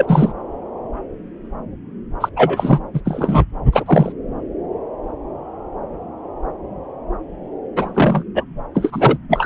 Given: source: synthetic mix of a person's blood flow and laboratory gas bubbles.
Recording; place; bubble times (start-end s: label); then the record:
Doppler ultrasound of blood flow; subclavian vein
0.00-0.33 s: bubbles
2.20-2.29 s: bubbles
2.36-2.79 s: bubbles
2.93-3.00 s: bubbles
3.05-3.45 s: bubbles
3.72-4.12 s: bubbles
7.76-7.91 s: bubbles
7.94-8.24 s: bubbles
8.35-8.45 s: bubbles
8.74-9.17 s: bubbles
9.29-9.46 s: bubbles
From the record:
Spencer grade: 2 (many but less than half of the cardiac periods contain bubble signals, singularly or in groups); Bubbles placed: anywhere in the cardiac cycle